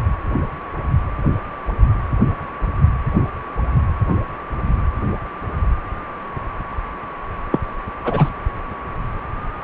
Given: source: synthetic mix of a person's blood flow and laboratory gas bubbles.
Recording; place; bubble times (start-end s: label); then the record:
Doppler ultrasound of blood flow; precordium
7.51-7.59 s: bubbles
8.04-8.29 s: bubbles
From the record:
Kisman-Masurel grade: 212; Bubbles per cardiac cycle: several, 3 to 8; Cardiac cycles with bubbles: 1 to 10%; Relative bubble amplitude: moderate (0.250 to 0.450); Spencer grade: 1 (occasional bubble signal discernible with the cardiac motion signal, with majority of cardiac periods free of bubbles); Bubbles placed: anywhere in the cardiac cycle